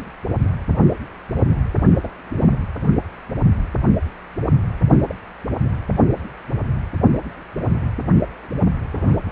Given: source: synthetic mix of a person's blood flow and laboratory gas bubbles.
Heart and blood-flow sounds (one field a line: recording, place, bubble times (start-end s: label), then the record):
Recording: Doppler ultrasound of blood flow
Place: precordium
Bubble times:
2.02-2.10 s: bubbles
2.38-2.59 s: bubbles
5.09-5.15 s: bubbles
8.91-9.32 s: bubbles
From the record:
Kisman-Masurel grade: 121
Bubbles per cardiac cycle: 1 to 2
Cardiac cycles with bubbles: 10 to 50%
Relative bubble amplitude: barely perceptible (0.100 to 0.250)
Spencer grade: 2 (many but less than half of the cardiac periods contain bubble signals, singularly or in groups)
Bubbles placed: only in the low amplitude regions of the cardiac cycle